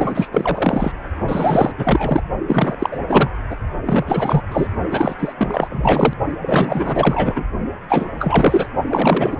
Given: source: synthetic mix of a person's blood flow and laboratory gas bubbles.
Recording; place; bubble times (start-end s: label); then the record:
Doppler ultrasound of blood flow; precordium
0.00-0.92 s: bubbles
1.28-1.72 s: bubbles
1.77-2.21 s: bubbles
2.47-2.99 s: bubbles
3.09-3.30 s: bubbles
3.49-3.57 s: bubbles
3.85-4.42 s: bubbles
4.51-4.67 s: bubbles
4.91-5.15 s: bubbles
5.19-5.33 s: bubbles
5.38-6.14 s: bubbles
6.42-7.44 s: bubbles
7.88-8.08 s: bubbles
8.19-8.67 s: bubbles
8.88-9.38 s: bubbles
From the record:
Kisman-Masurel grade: 444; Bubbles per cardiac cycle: continuous sound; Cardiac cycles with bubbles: 100%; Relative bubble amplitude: maximal (0.775 to 0.999); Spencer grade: 4 (maximum detectable bubble signal sounding continuously throughout systole and diastole of every cardiac period, and overriding the amplitude of the normal cardiac signals); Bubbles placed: only in the low amplitude regions of the cardiac cycle